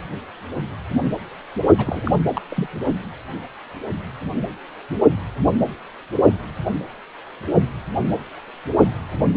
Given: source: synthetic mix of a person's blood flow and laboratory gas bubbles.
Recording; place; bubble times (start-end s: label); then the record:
Doppler ultrasound of blood flow; precordium
1.77-2.00 s: bubbles
2.04-2.11 s: bubbles
2.34-2.42 s: bubbles
2.50-2.67 s: bubbles
From the record:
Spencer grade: 2 (many but less than half of the cardiac periods contain bubble signals, singularly or in groups); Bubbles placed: only in the low amplitude regions of the cardiac cycle